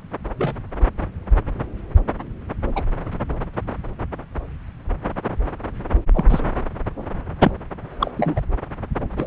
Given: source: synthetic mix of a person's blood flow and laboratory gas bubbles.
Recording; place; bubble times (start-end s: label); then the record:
Doppler ultrasound of blood flow; subclavian vein
0.38-0.56 s: bubbles
2.75-2.83 s: bubbles
6.14-6.25 s: bubbles
6.29-6.40 s: bubbles
7.43-7.51 s: bubbles
8.00-8.11 s: bubbles
8.17-8.41 s: bubbles
9.17-9.27 s: bubbles
From the record:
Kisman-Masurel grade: 122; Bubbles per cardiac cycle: 1 to 2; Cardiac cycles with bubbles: 10 to 50%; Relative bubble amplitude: moderate (0.250 to 0.450); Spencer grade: 2 (many but less than half of the cardiac periods contain bubble signals, singularly or in groups); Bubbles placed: anywhere in the cardiac cycle